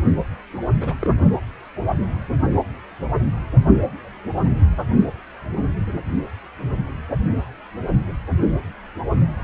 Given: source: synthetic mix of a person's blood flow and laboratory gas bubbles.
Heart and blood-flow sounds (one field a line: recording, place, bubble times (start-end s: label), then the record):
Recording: Doppler ultrasound of blood flow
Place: precordium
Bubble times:
0.80-0.94 s: bubbles
0.99-1.10 s: bubbles
From the record:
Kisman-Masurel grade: 221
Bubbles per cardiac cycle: several, 3 to 8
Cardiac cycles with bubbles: 10 to 50%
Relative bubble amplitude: barely perceptible (0.100 to 0.250)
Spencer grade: 2 (many but less than half of the cardiac periods contain bubble signals, singularly or in groups)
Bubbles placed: only in the low amplitude regions of the cardiac cycle